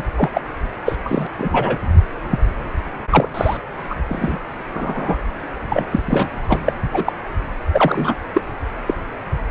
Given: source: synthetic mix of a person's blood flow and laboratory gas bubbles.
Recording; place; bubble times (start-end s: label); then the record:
Doppler ultrasound of blood flow; precordium
0.00-0.02 s: bubbles
0.16-0.31 s: bubbles
0.33-0.42 s: bubbles
0.85-0.97 s: bubbles
1.06-1.30 s: bubbles
1.38-1.80 s: bubbles
2.30-2.39 s: bubbles
3.10-3.29 s: bubbles
3.34-3.57 s: bubbles
3.89-3.95 s: bubbles
4.08-4.39 s: bubbles
4.73-5.17 s: bubbles
5.69-6.01 s: bubbles
6.05-6.28 s: bubbles
6.48-6.59 s: bubbles
6.65-6.72 s: bubbles
6.92-7.12 s: bubbles
7.73-8.15 s: bubbles
8.34-8.41 s: bubbles
8.86-8.94 s: bubbles
From the record:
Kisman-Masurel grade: 243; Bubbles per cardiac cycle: several, 3 to 8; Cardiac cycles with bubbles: 100%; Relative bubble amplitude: loud (0.450 to 0.775); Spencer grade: 3 (all of the cardiac periods contain showers or single bubble signals, but not dominating or overriding the cardiac motion signals); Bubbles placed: anywhere in the cardiac cycle